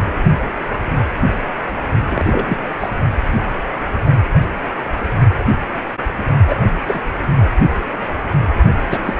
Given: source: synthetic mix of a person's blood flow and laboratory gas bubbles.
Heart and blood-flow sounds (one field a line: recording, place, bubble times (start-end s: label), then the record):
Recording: Doppler ultrasound of blood flow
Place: precordium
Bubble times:
2.11-2.59 s: bubbles
2.80-2.90 s: bubbles
6.47-6.56 s: bubbles
6.87-7.02 s: bubbles
8.90-8.99 s: bubbles
9.05-9.15 s: bubbles
From the record:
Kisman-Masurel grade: 222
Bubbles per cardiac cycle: several, 3 to 8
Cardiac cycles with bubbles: 10 to 50%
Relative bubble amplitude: moderate (0.250 to 0.450)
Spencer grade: 2 (many but less than half of the cardiac periods contain bubble signals, singularly or in groups)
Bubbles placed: only in the low amplitude regions of the cardiac cycle